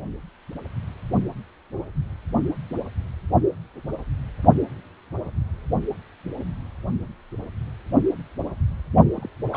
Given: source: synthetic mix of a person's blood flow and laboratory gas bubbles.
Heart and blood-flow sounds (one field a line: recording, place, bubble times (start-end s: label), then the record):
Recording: Doppler ultrasound of blood flow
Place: precordium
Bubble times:
9.15-9.29 s: bubbles
9.53-9.57 s: bubbles
From the record:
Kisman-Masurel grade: 111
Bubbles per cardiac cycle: 1 to 2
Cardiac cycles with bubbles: 1 to 10%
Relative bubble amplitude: barely perceptible (0.100 to 0.250)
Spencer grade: 1 (occasional bubble signal discernible with the cardiac motion signal, with majority of cardiac periods free of bubbles)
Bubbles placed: only in the low amplitude regions of the cardiac cycle